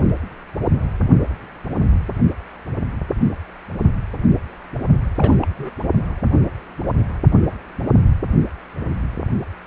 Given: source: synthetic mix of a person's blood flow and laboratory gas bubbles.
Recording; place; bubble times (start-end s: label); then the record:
Doppler ultrasound of blood flow; precordium
5.17-5.36 s: bubbles
5.41-5.47 s: bubbles
5.58-5.71 s: bubbles
From the record:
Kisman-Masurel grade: 211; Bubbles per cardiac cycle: several, 3 to 8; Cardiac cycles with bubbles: 1 to 10%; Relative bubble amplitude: barely perceptible (0.100 to 0.250); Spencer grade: 1 (occasional bubble signal discernible with the cardiac motion signal, with majority of cardiac periods free of bubbles); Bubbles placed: only in the low amplitude regions of the cardiac cycle